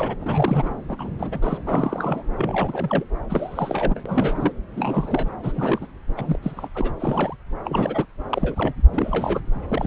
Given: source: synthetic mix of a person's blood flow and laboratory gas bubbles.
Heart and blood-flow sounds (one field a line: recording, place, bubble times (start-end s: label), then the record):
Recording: Doppler ultrasound of blood flow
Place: subclavian vein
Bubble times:
0.00-0.15 s: bubbles
0.20-0.73 s: bubbles
0.89-1.58 s: bubbles
1.66-2.23 s: bubbles
2.37-3.04 s: bubbles
3.29-4.03 s: bubbles
4.05-4.52 s: bubbles
4.75-5.29 s: bubbles
5.43-5.88 s: bubbles
6.17-6.39 s: bubbles
6.42-6.68 s: bubbles
6.75-6.92 s: bubbles
7.00-7.36 s: bubbles
7.64-8.06 s: bubbles
8.29-8.73 s: bubbles
8.92-9.40 s: bubbles
9.68-9.87 s: bubbles
From the record:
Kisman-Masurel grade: 342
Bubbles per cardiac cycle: rolling drumbeat, 9 or more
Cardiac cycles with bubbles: 100%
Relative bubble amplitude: moderate (0.250 to 0.450)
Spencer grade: 3 (all of the cardiac periods contain showers or single bubble signals, but not dominating or overriding the cardiac motion signals)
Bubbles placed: anywhere in the cardiac cycle